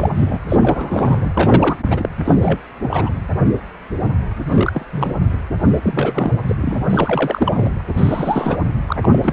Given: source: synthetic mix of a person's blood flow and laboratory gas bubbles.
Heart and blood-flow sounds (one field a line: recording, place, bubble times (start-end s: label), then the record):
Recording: Doppler ultrasound of blood flow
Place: precordium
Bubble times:
0.00-0.10 s: bubbles
0.15-0.39 s: bubbles
0.49-1.30 s: bubbles
1.34-1.76 s: bubbles
1.90-2.09 s: bubbles
2.25-2.60 s: bubbles
2.81-3.12 s: bubbles
4.49-4.85 s: bubbles
4.92-5.16 s: bubbles
5.62-6.33 s: bubbles
6.48-6.78 s: bubbles
6.90-7.73 s: bubbles
7.79-7.82 s: bubbles
7.94-8.57 s: bubbles
8.88-9.18 s: bubbles
9.22-9.33 s: bubbles
From the record:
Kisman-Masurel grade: 332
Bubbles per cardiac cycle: rolling drumbeat, 9 or more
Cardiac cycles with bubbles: 50 to 99%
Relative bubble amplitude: moderate (0.250 to 0.450)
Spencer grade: 3 (all of the cardiac periods contain showers or single bubble signals, but not dominating or overriding the cardiac motion signals)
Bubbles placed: anywhere in the cardiac cycle